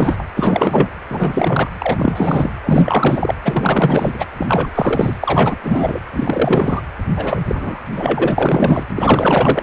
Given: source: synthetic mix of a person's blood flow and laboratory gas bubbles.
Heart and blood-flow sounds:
Doppler ultrasound of blood flow; precordium
0.00-0.23 s: bubbles
0.35-0.88 s: bubbles
1.09-1.70 s: bubbles
1.78-2.52 s: bubbles
2.65-3.34 s: bubbles
3.43-4.25 s: bubbles
4.38-4.70 s: bubbles
4.74-5.16 s: bubbles
5.21-5.55 s: bubbles
5.62-6.00 s: bubbles
6.13-6.82 s: bubbles
7.16-7.42 s: bubbles
7.47-7.80 s: bubbles
7.93-8.88 s: bubbles
8.96-9.63 s: bubbles
From the record:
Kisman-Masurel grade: 444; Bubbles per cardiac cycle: continuous sound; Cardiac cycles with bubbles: 100%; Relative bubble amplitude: maximal (0.775 to 0.999); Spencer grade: 4 (maximum detectable bubble signal sounding continuously throughout systole and diastole of every cardiac period, and overriding the amplitude of the normal cardiac signals); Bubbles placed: anywhere in the cardiac cycle

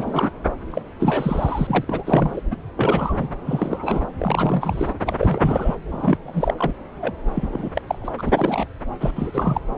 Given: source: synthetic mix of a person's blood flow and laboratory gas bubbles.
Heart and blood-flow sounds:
Doppler ultrasound of blood flow; subclavian vein
0.00-0.31 s: bubbles
0.70-0.81 s: bubbles
0.99-1.84 s: bubbles
1.89-2.41 s: bubbles
2.51-2.56 s: bubbles
2.77-3.28 s: bubbles
3.46-4.03 s: bubbles
4.18-4.93 s: bubbles
5.06-5.76 s: bubbles
5.91-6.17 s: bubbles
6.25-6.54 s: bubbles
6.57-6.74 s: bubbles
7.00-7.15 s: bubbles
7.34-7.69 s: bubbles
7.75-7.82 s: bubbles
7.87-7.99 s: bubbles
8.01-8.09 s: bubbles
8.18-8.65 s: bubbles
9.00-9.11 s: bubbles
9.15-9.61 s: bubbles
From the record:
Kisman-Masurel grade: 343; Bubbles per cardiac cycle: rolling drumbeat, 9 or more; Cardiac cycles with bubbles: 100%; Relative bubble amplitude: loud (0.450 to 0.775); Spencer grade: 3 (all of the cardiac periods contain showers or single bubble signals, but not dominating or overriding the cardiac motion signals); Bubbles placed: anywhere in the cardiac cycle

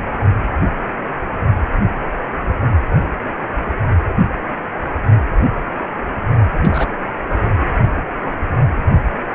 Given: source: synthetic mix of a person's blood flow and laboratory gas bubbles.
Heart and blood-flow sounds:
Doppler ultrasound of blood flow; precordium
6.61-6.89 s: bubbles
From the record:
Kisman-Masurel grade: 112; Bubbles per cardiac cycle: 1 to 2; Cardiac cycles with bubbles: 1 to 10%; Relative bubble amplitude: moderate (0.250 to 0.450); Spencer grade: 1 (occasional bubble signal discernible with the cardiac motion signal, with majority of cardiac periods free of bubbles); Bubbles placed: only in the low amplitude regions of the cardiac cycle

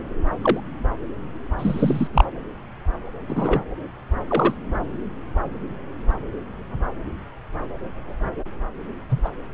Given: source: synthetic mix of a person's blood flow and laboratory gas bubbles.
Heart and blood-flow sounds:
Doppler ultrasound of blood flow; subclavian vein
0.42-0.60 s: bubbles
1.58-2.08 s: bubbles
2.14-2.25 s: bubbles
3.27-3.61 s: bubbles
4.28-4.54 s: bubbles
9.09-9.21 s: bubbles
9.24-9.29 s: bubbles
From the record:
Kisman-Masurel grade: 123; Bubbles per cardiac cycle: 1 to 2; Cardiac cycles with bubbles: 10 to 50%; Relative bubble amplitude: loud (0.450 to 0.775); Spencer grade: 2 (many but less than half of the cardiac periods contain bubble signals, singularly or in groups); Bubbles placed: anywhere in the cardiac cycle

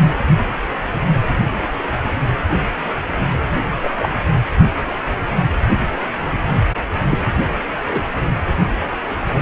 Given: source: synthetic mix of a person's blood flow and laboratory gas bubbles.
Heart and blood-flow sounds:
Doppler ultrasound of blood flow; precordium
3.82-4.08 s: bubbles
7.10-7.18 s: bubbles
7.91-8.01 s: bubbles
From the record:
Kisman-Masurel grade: 123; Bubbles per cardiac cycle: 1 to 2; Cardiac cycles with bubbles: 10 to 50%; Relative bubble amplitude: loud (0.450 to 0.775); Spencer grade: 2 (many but less than half of the cardiac periods contain bubble signals, singularly or in groups); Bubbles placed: anywhere in the cardiac cycle

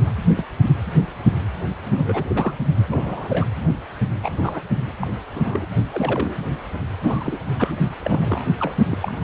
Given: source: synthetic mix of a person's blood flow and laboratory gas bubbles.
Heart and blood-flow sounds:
Doppler ultrasound of blood flow; precordium
0.05-0.11 s: bubbles
0.36-0.45 s: bubbles
1.84-2.23 s: bubbles
2.30-2.58 s: bubbles
2.87-3.47 s: bubbles
4.22-4.29 s: bubbles
4.38-4.61 s: bubbles
5.01-5.07 s: bubbles
5.34-5.67 s: bubbles
5.90-6.40 s: bubbles
7.01-7.37 s: bubbles
7.59-7.72 s: bubbles
8.03-8.44 s: bubbles
8.59-8.75 s: bubbles
8.89-8.97 s: bubbles
9.00-9.12 s: bubbles
9.22-9.24 s: bubbles
From the record:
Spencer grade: 3 (all of the cardiac periods contain showers or single bubble signals, but not dominating or overriding the cardiac motion signals); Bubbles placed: only in the low amplitude regions of the cardiac cycle

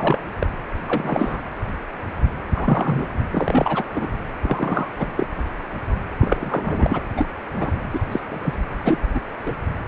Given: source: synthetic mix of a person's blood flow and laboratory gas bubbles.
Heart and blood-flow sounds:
Doppler ultrasound of blood flow; precordium
0.00-0.18 s: bubbles
0.39-0.47 s: bubbles
0.87-1.41 s: bubbles
2.55-3.06 s: bubbles
3.31-3.84 s: bubbles
3.94-4.08 s: bubbles
4.42-4.91 s: bubbles
5.00-5.10 s: bubbles
5.16-5.27 s: bubbles
6.21-7.02 s: bubbles
7.17-7.26 s: bubbles
7.56-7.72 s: bubbles
7.93-7.99 s: bubbles
8.12-8.20 s: bubbles
8.30-8.55 s: bubbles
8.84-8.98 s: bubbles
9.14-9.19 s: bubbles
9.46-9.53 s: bubbles
From the record:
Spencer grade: 3 (all of the cardiac periods contain showers or single bubble signals, but not dominating or overriding the cardiac motion signals); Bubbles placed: anywhere in the cardiac cycle

